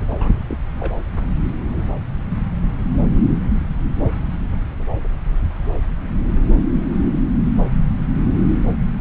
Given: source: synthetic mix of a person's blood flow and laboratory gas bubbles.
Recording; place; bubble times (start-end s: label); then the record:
Doppler ultrasound of blood flow; subclavian vein
0.10-0.36 s: bubbles
0.49-0.56 s: bubbles
0.79-0.93 s: bubbles
From the record:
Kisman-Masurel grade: 211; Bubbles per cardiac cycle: several, 3 to 8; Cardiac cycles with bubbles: 1 to 10%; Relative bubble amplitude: barely perceptible (0.100 to 0.250); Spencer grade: 1 (occasional bubble signal discernible with the cardiac motion signal, with majority of cardiac periods free of bubbles); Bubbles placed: anywhere in the cardiac cycle